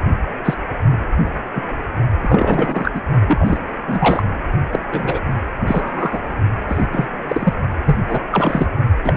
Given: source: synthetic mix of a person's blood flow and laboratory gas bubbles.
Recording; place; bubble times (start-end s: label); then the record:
Doppler ultrasound of blood flow; precordium
0.45-0.54 s: bubbles
0.91-0.98 s: bubbles
1.55-1.63 s: bubbles
2.21-2.91 s: bubbles
2.94-3.01 s: bubbles
3.26-3.58 s: bubbles
3.87-4.22 s: bubbles
4.71-4.79 s: bubbles
4.92-5.19 s: bubbles
5.67-6.21 s: bubbles
6.68-6.87 s: bubbles
6.92-7.08 s: bubbles
7.27-7.54 s: bubbles
7.85-7.96 s: bubbles
8.00-8.21 s: bubbles
8.31-8.66 s: bubbles
9.04-9.14 s: bubbles
From the record:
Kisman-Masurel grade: 243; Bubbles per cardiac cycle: several, 3 to 8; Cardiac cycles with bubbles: 100%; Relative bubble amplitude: loud (0.450 to 0.775); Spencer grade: 3 (all of the cardiac periods contain showers or single bubble signals, but not dominating or overriding the cardiac motion signals); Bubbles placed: only in the low amplitude regions of the cardiac cycle